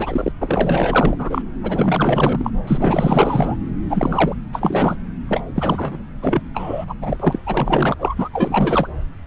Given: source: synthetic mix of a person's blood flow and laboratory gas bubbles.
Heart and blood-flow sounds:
Doppler ultrasound of blood flow; subclavian vein
0.00-0.32 s: bubbles
0.40-1.42 s: bubbles
1.62-2.51 s: bubbles
2.67-3.60 s: bubbles
3.90-4.35 s: bubbles
4.53-4.97 s: bubbles
5.28-5.43 s: bubbles
5.54-5.98 s: bubbles
6.21-6.41 s: bubbles
6.54-6.95 s: bubbles
7.01-7.17 s: bubbles
7.20-7.40 s: bubbles
7.46-7.94 s: bubbles
7.98-8.29 s: bubbles
8.33-8.89 s: bubbles
From the record:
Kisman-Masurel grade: 444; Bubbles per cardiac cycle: continuous sound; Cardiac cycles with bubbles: 100%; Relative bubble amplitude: maximal (0.775 to 0.999); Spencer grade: 4 (maximum detectable bubble signal sounding continuously throughout systole and diastole of every cardiac period, and overriding the amplitude of the normal cardiac signals); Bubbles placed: anywhere in the cardiac cycle

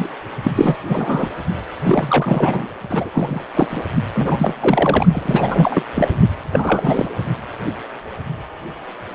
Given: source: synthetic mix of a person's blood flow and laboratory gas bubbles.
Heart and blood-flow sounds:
Doppler ultrasound of blood flow; precordium
0.00-0.08 s: bubbles
0.43-0.52 s: bubbles
0.55-0.77 s: bubbles
0.88-1.28 s: bubbles
1.84-2.69 s: bubbles
2.90-3.42 s: bubbles
3.53-3.67 s: bubbles
3.70-3.86 s: bubbles
4.15-4.54 s: bubbles
4.60-5.06 s: bubbles
5.12-5.83 s: bubbles
5.94-6.08 s: bubbles
6.52-7.09 s: bubbles
From the record:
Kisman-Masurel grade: 333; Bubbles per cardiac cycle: rolling drumbeat, 9 or more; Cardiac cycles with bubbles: 50 to 99%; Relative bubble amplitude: loud (0.450 to 0.775); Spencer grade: 3 (all of the cardiac periods contain showers or single bubble signals, but not dominating or overriding the cardiac motion signals); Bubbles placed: only in the low amplitude regions of the cardiac cycle

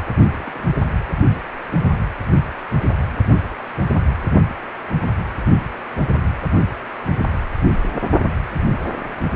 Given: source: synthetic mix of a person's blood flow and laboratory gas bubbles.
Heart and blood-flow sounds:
Doppler ultrasound of blood flow; precordium
0.35-0.72 s: bubbles
From the record:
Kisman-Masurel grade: 111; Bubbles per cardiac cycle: 1 to 2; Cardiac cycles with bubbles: 1 to 10%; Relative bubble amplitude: barely perceptible (0.100 to 0.250); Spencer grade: 1 (occasional bubble signal discernible with the cardiac motion signal, with majority of cardiac periods free of bubbles); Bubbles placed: anywhere in the cardiac cycle

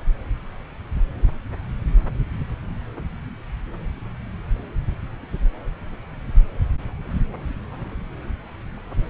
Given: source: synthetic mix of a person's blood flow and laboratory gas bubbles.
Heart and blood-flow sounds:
Doppler ultrasound of blood flow; subclavian vein
no bubbles
From the record:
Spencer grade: 0 (complete lack of bubble signals)

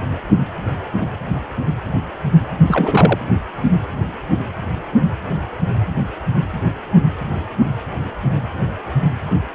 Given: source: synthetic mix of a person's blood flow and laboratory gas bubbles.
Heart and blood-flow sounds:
Doppler ultrasound of blood flow; precordium
2.67-3.19 s: bubbles
From the record:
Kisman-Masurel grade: 212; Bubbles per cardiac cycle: several, 3 to 8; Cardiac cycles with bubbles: 1 to 10%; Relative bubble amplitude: moderate (0.250 to 0.450); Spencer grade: 1 (occasional bubble signal discernible with the cardiac motion signal, with majority of cardiac periods free of bubbles); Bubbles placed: anywhere in the cardiac cycle

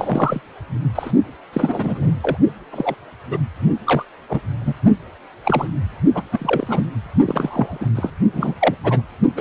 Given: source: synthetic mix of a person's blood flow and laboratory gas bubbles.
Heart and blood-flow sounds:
Doppler ultrasound of blood flow; precordium
0.00-0.41 s: bubbles
0.95-1.11 s: bubbles
1.53-2.11 s: bubbles
2.21-2.37 s: bubbles
2.71-2.95 s: bubbles
3.30-3.38 s: bubbles
3.85-4.05 s: bubbles
4.29-4.41 s: bubbles
4.60-4.73 s: bubbles
5.44-5.67 s: bubbles
6.13-6.22 s: bubbles
6.32-6.87 s: bubbles
7.26-7.88 s: bubbles
7.95-8.10 s: bubbles
8.33-8.54 s: bubbles
8.61-8.74 s: bubbles
8.84-9.02 s: bubbles
9.37-9.41 s: bubbles
From the record:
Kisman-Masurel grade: 232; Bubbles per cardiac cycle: several, 3 to 8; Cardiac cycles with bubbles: 50 to 99%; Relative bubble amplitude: moderate (0.250 to 0.450); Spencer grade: 3 (all of the cardiac periods contain showers or single bubble signals, but not dominating or overriding the cardiac motion signals); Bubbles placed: only in the low amplitude regions of the cardiac cycle

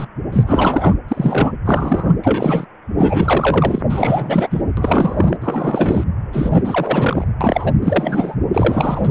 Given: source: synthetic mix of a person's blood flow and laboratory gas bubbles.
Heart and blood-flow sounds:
Doppler ultrasound of blood flow; precordium
0.00-0.07 s: bubbles
0.32-0.43 s: bubbles
0.47-0.94 s: bubbles
1.08-1.53 s: bubbles
1.65-2.13 s: bubbles
2.22-2.67 s: bubbles
2.98-3.82 s: bubbles
3.89-4.62 s: bubbles
4.77-5.37 s: bubbles
5.41-6.04 s: bubbles
6.33-6.62 s: bubbles
6.65-7.25 s: bubbles
7.41-7.72 s: bubbles
7.83-8.35 s: bubbles
8.52-9.09 s: bubbles
From the record:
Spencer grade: 3 (all of the cardiac periods contain showers or single bubble signals, but not dominating or overriding the cardiac motion signals); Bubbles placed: anywhere in the cardiac cycle

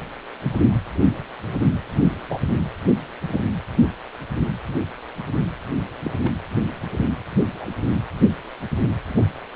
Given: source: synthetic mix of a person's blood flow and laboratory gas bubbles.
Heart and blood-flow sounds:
Doppler ultrasound of blood flow; precordium
2.29-2.38 s: bubbles
3.28-3.42 s: bubbles
6.04-6.11 s: bubbles
6.25-6.32 s: bubbles
7.58-7.66 s: bubbles
9.17-9.21 s: bubbles
From the record:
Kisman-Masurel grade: 121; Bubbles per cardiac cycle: 1 to 2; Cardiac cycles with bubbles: 10 to 50%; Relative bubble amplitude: barely perceptible (0.100 to 0.250); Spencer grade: 2 (many but less than half of the cardiac periods contain bubble signals, singularly or in groups); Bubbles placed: anywhere in the cardiac cycle

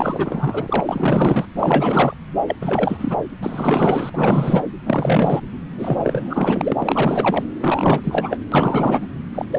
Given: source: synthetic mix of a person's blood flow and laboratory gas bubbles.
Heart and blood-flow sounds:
Doppler ultrasound of blood flow; subclavian vein
0.00-0.81 s: bubbles
0.85-1.46 s: bubbles
1.57-2.14 s: bubbles
2.48-2.56 s: bubbles
2.60-3.17 s: bubbles
3.42-4.63 s: bubbles
4.86-5.41 s: bubbles
5.78-6.75 s: bubbles
6.79-7.46 s: bubbles
7.60-8.00 s: bubbles
8.04-8.37 s: bubbles
8.51-9.05 s: bubbles
9.34-9.46 s: bubbles
9.50-9.59 s: bubbles
From the record:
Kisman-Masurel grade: 444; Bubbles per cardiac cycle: continuous sound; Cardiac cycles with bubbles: 100%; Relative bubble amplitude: maximal (0.775 to 0.999); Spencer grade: 4 (maximum detectable bubble signal sounding continuously throughout systole and diastole of every cardiac period, and overriding the amplitude of the normal cardiac signals); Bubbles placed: anywhere in the cardiac cycle

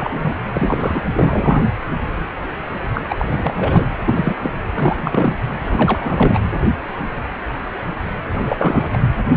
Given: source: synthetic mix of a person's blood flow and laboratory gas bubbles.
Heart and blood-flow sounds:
Doppler ultrasound of blood flow; precordium
0.00-0.33 s: bubbles
0.53-1.01 s: bubbles
1.15-1.63 s: bubbles
2.94-3.02 s: bubbles
3.09-3.15 s: bubbles
3.18-3.25 s: bubbles
3.31-3.85 s: bubbles
4.07-4.35 s: bubbles
4.41-4.52 s: bubbles
4.74-4.96 s: bubbles
5.00-5.37 s: bubbles
5.59-6.40 s: bubbles
8.32-8.89 s: bubbles
8.93-8.98 s: bubbles
9.02-9.08 s: bubbles
From the record:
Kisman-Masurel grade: 333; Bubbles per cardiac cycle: rolling drumbeat, 9 or more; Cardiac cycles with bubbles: 50 to 99%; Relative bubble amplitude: loud (0.450 to 0.775); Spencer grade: 3 (all of the cardiac periods contain showers or single bubble signals, but not dominating or overriding the cardiac motion signals); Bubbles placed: anywhere in the cardiac cycle

